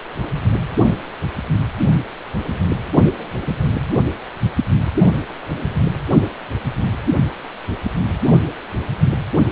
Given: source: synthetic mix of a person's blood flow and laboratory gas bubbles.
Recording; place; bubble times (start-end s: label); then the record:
Doppler ultrasound of blood flow; precordium
2.89-2.98 s: bubbles
3.06-3.11 s: bubbles
3.19-3.29 s: bubbles
3.43-3.58 s: bubbles
From the record:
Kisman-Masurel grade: 221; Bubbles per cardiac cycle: several, 3 to 8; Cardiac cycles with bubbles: 10 to 50%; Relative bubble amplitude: barely perceptible (0.100 to 0.250); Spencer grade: 2 (many but less than half of the cardiac periods contain bubble signals, singularly or in groups); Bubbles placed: anywhere in the cardiac cycle